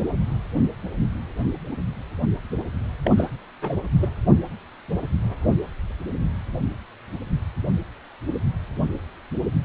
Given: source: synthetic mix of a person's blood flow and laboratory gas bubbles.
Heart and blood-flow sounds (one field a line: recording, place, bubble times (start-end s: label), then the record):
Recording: Doppler ultrasound of blood flow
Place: precordium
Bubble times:
3.03-3.10 s: bubbles
3.17-3.32 s: bubbles
3.62-3.79 s: bubbles
4.01-4.08 s: bubbles
From the record:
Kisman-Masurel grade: 211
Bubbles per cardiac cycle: several, 3 to 8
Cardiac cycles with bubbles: 1 to 10%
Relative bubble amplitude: barely perceptible (0.100 to 0.250)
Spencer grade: 1 (occasional bubble signal discernible with the cardiac motion signal, with majority of cardiac periods free of bubbles)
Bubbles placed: anywhere in the cardiac cycle